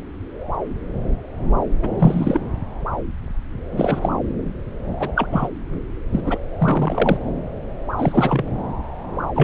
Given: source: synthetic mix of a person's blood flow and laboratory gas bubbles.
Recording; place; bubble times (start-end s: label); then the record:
Doppler ultrasound of blood flow; subclavian vein
1.83-1.88 s: bubbles
2.00-2.41 s: bubbles
3.72-4.09 s: bubbles
4.96-5.12 s: bubbles
5.15-5.26 s: bubbles
5.32-5.48 s: bubbles
6.12-6.38 s: bubbles
6.59-7.19 s: bubbles
7.98-8.44 s: bubbles
9.35-9.44 s: bubbles
From the record:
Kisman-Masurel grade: 223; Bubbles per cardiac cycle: several, 3 to 8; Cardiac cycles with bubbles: 10 to 50%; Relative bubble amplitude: loud (0.450 to 0.775); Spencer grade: 2 (many but less than half of the cardiac periods contain bubble signals, singularly or in groups); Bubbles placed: anywhere in the cardiac cycle